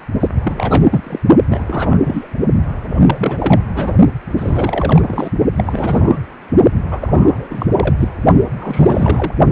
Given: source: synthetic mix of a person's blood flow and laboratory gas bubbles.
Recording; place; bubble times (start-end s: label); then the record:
Doppler ultrasound of blood flow; precordium
0.19-0.28 s: bubbles
0.43-0.88 s: bubbles
0.90-1.19 s: bubbles
1.49-1.63 s: bubbles
1.67-1.99 s: bubbles
2.04-2.28 s: bubbles
2.88-3.61 s: bubbles
3.75-3.94 s: bubbles
4.36-5.31 s: bubbles
5.57-6.18 s: bubbles
6.91-7.48 s: bubbles
7.51-7.95 s: bubbles
7.99-8.09 s: bubbles
8.58-9.33 s: bubbles
From the record:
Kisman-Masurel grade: 342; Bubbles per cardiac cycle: rolling drumbeat, 9 or more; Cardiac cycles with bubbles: 100%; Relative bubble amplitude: moderate (0.250 to 0.450); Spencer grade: 3 (all of the cardiac periods contain showers or single bubble signals, but not dominating or overriding the cardiac motion signals); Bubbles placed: only in the low amplitude regions of the cardiac cycle